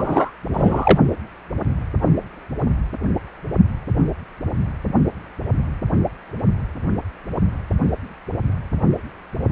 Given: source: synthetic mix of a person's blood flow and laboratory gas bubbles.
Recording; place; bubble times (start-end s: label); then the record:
Doppler ultrasound of blood flow; precordium
0.00-0.32 s: bubbles
0.53-0.99 s: bubbles
From the record:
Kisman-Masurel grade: 213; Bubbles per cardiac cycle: several, 3 to 8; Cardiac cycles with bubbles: 1 to 10%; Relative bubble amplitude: loud (0.450 to 0.775); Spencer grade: 1 (occasional bubble signal discernible with the cardiac motion signal, with majority of cardiac periods free of bubbles); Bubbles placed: anywhere in the cardiac cycle